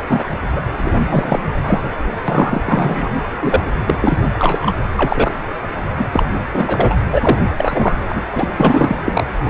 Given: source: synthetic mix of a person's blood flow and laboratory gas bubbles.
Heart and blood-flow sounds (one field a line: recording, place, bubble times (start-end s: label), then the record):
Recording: Doppler ultrasound of blood flow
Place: precordium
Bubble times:
0.09-0.25 s: bubbles
0.55-0.61 s: bubbles
0.76-1.04 s: bubbles
1.08-1.42 s: bubbles
1.63-1.89 s: bubbles
2.27-3.10 s: bubbles
3.40-3.64 s: bubbles
3.86-3.95 s: bubbles
4.02-4.18 s: bubbles
4.33-4.76 s: bubbles
4.96-5.33 s: bubbles
5.98-6.06 s: bubbles
6.12-6.23 s: bubbles
6.53-6.96 s: bubbles
7.12-7.47 s: bubbles
7.60-7.99 s: bubbles
8.08-8.22 s: bubbles
8.32-8.48 s: bubbles
8.57-8.96 s: bubbles
9.05-9.24 s: bubbles
9.41-9.50 s: bubbles
From the record:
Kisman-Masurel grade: 233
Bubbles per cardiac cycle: several, 3 to 8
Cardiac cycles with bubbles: 50 to 99%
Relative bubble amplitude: loud (0.450 to 0.775)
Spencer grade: 3 (all of the cardiac periods contain showers or single bubble signals, but not dominating or overriding the cardiac motion signals)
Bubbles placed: anywhere in the cardiac cycle